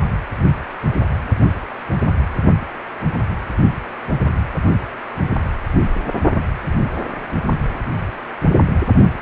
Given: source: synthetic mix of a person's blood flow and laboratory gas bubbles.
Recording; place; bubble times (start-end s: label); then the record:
Doppler ultrasound of blood flow; precordium
no bubbles
From the record:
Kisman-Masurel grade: 000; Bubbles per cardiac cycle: 0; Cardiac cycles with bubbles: 0%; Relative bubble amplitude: no bubbles discernible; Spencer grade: 0 (complete lack of bubble signals)